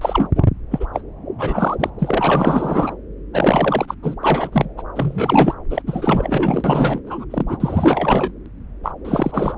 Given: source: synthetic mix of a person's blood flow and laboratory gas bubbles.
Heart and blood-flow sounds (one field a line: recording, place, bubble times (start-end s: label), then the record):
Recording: Doppler ultrasound of blood flow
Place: subclavian vein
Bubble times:
0.01-0.28 s: bubbles
0.35-0.45 s: bubbles
0.71-0.86 s: bubbles
0.93-1.01 s: bubbles
1.38-1.75 s: bubbles
1.79-1.90 s: bubbles
1.99-2.94 s: bubbles
3.33-3.94 s: bubbles
4.02-4.15 s: bubbles
4.21-4.66 s: bubbles
4.77-4.82 s: bubbles
4.95-5.54 s: bubbles
5.70-5.82 s: bubbles
5.86-7.01 s: bubbles
7.06-7.25 s: bubbles
7.30-7.42 s: bubbles
7.47-7.57 s: bubbles
7.60-8.32 s: bubbles
8.83-8.91 s: bubbles
9.04-9.55 s: bubbles
From the record:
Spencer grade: 4 (maximum detectable bubble signal sounding continuously throughout systole and diastole of every cardiac period, and overriding the amplitude of the normal cardiac signals)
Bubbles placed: anywhere in the cardiac cycle